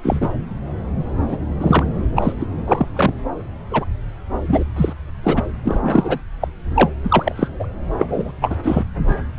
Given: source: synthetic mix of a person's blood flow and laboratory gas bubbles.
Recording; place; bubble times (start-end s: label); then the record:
Doppler ultrasound of blood flow; subclavian vein
0.02-0.28 s: bubbles
1.27-1.38 s: bubbles
1.60-1.84 s: bubbles
2.15-2.33 s: bubbles
2.40-2.46 s: bubbles
2.67-2.87 s: bubbles
2.96-3.13 s: bubbles
3.71-3.85 s: bubbles
4.40-4.63 s: bubbles
4.76-4.93 s: bubbles
5.23-5.42 s: bubbles
5.63-6.19 s: bubbles
6.41-6.48 s: bubbles
6.75-6.90 s: bubbles
7.04-7.47 s: bubbles
7.59-7.66 s: bubbles
7.98-8.32 s: bubbles
8.41-8.56 s: bubbles
8.63-8.83 s: bubbles
9.07-9.15 s: bubbles
9.37-9.39 s: bubbles
From the record:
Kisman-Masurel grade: 243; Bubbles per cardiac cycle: several, 3 to 8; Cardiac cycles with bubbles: 100%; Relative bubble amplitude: loud (0.450 to 0.775); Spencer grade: 3 (all of the cardiac periods contain showers or single bubble signals, but not dominating or overriding the cardiac motion signals); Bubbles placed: anywhere in the cardiac cycle